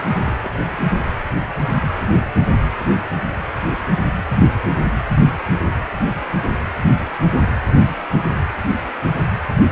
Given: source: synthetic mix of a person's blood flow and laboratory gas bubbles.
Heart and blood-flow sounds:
Doppler ultrasound of blood flow; precordium
0.14-0.21 s: bubbles
0.24-0.76 s: bubbles
From the record:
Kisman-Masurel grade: 111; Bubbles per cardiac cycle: 1 to 2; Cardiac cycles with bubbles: 1 to 10%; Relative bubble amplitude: barely perceptible (0.100 to 0.250); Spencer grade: 1 (occasional bubble signal discernible with the cardiac motion signal, with majority of cardiac periods free of bubbles); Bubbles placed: anywhere in the cardiac cycle

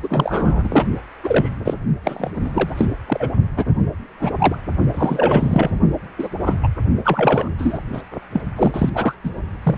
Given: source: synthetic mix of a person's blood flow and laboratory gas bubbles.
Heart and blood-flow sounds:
Doppler ultrasound of blood flow; precordium
0.02-0.85 s: bubbles
1.23-1.56 s: bubbles
1.65-1.74 s: bubbles
2.04-2.31 s: bubbles
2.35-2.85 s: bubbles
3.06-3.29 s: bubbles
3.56-3.73 s: bubbles
4.19-4.56 s: bubbles
4.94-5.80 s: bubbles
6.18-6.29 s: bubbles
6.40-6.56 s: bubbles
6.62-6.68 s: bubbles
7.04-7.50 s: bubbles
7.58-7.78 s: bubbles
7.93-8.02 s: bubbles
8.33-8.43 s: bubbles
8.56-8.90 s: bubbles
8.94-9.14 s: bubbles
9.24-9.30 s: bubbles
9.63-9.78 s: bubbles
From the record:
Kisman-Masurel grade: 243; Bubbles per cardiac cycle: several, 3 to 8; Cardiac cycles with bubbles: 100%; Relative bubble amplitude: loud (0.450 to 0.775); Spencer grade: 3 (all of the cardiac periods contain showers or single bubble signals, but not dominating or overriding the cardiac motion signals); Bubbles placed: only in the low amplitude regions of the cardiac cycle

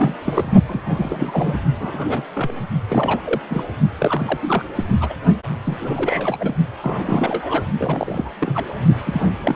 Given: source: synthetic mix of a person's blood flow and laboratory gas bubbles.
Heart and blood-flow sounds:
Doppler ultrasound of blood flow; precordium
0.00-0.15 s: bubbles
0.25-0.52 s: bubbles
0.68-1.57 s: bubbles
1.79-2.23 s: bubbles
2.35-2.71 s: bubbles
2.89-3.41 s: bubbles
3.50-3.65 s: bubbles
3.98-4.39 s: bubbles
4.42-4.65 s: bubbles
4.75-4.83 s: bubbles
5.00-5.14 s: bubbles
5.64-6.55 s: bubbles
6.82-7.64 s: bubbles
7.79-8.29 s: bubbles
8.38-8.66 s: bubbles
9.06-9.31 s: bubbles
9.44-9.56 s: bubbles
From the record:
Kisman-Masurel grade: 342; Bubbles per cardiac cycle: rolling drumbeat, 9 or more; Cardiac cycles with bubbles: 100%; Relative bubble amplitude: moderate (0.250 to 0.450); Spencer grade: 3 (all of the cardiac periods contain showers or single bubble signals, but not dominating or overriding the cardiac motion signals); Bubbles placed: only in the low amplitude regions of the cardiac cycle

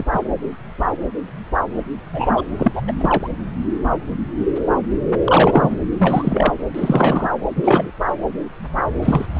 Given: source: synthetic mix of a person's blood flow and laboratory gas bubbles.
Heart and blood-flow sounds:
Doppler ultrasound of blood flow; subclavian vein
0.00-0.05 s: bubbles
0.12-0.20 s: bubbles
2.12-2.46 s: bubbles
2.58-2.81 s: bubbles
2.87-3.29 s: bubbles
5.24-5.77 s: bubbles
5.98-6.52 s: bubbles
6.74-7.31 s: bubbles
7.55-7.91 s: bubbles
9.03-9.26 s: bubbles
9.34-9.40 s: bubbles
From the record:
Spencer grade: 3 (all of the cardiac periods contain showers or single bubble signals, but not dominating or overriding the cardiac motion signals); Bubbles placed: anywhere in the cardiac cycle

